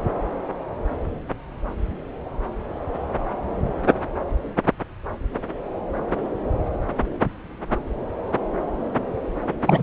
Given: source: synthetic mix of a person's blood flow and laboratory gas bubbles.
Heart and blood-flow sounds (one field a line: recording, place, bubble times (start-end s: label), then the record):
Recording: Doppler ultrasound of blood flow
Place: subclavian vein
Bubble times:
9.66-9.83 s: bubbles
From the record:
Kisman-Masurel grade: 213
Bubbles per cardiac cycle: several, 3 to 8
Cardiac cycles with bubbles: 1 to 10%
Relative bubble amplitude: loud (0.450 to 0.775)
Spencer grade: 1 (occasional bubble signal discernible with the cardiac motion signal, with majority of cardiac periods free of bubbles)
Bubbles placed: anywhere in the cardiac cycle